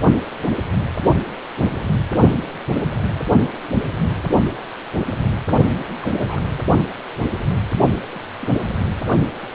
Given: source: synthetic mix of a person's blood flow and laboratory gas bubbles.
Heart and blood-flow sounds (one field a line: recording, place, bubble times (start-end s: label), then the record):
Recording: Doppler ultrasound of blood flow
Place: precordium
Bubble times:
1.61-1.98 s: bubbles
6.02-6.42 s: bubbles
8.14-8.20 s: bubbles
8.41-8.47 s: bubbles
From the record:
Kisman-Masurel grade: 121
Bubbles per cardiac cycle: 1 to 2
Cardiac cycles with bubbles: 10 to 50%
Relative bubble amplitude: barely perceptible (0.100 to 0.250)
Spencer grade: 2 (many but less than half of the cardiac periods contain bubble signals, singularly or in groups)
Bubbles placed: only in the low amplitude regions of the cardiac cycle